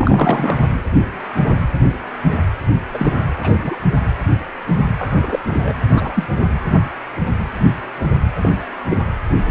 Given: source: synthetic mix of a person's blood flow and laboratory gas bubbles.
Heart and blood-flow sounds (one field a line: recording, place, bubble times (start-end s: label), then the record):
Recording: Doppler ultrasound of blood flow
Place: precordium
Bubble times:
0.00-0.61 s: bubbles
2.94-3.25 s: bubbles
3.43-3.76 s: bubbles
4.98-5.39 s: bubbles
5.46-5.73 s: bubbles
5.92-6.26 s: bubbles
6.40-6.48 s: bubbles
8.41-8.50 s: bubbles
8.89-8.97 s: bubbles
From the record:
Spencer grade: 2 (many but less than half of the cardiac periods contain bubble signals, singularly or in groups)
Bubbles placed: anywhere in the cardiac cycle